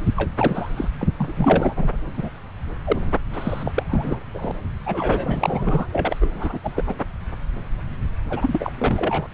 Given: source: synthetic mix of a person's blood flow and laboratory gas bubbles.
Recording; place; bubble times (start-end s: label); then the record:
Doppler ultrasound of blood flow; subclavian vein
0.16-0.31 s: bubbles
0.38-0.69 s: bubbles
0.76-0.90 s: bubbles
0.99-1.08 s: bubbles
1.18-1.88 s: bubbles
2.17-2.29 s: bubbles
2.85-3.11 s: bubbles
3.33-3.72 s: bubbles
3.74-3.83 s: bubbles
3.89-4.19 s: bubbles
4.34-4.52 s: bubbles
4.86-5.88 s: bubbles
5.92-6.16 s: bubbles
6.21-6.29 s: bubbles
6.34-6.58 s: bubbles
6.64-6.83 s: bubbles
6.87-6.95 s: bubbles
8.29-8.72 s: bubbles
8.78-9.27 s: bubbles
From the record:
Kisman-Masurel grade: 332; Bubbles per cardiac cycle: rolling drumbeat, 9 or more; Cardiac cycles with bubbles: 50 to 99%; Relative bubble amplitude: moderate (0.250 to 0.450); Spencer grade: 3 (all of the cardiac periods contain showers or single bubble signals, but not dominating or overriding the cardiac motion signals); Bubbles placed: anywhere in the cardiac cycle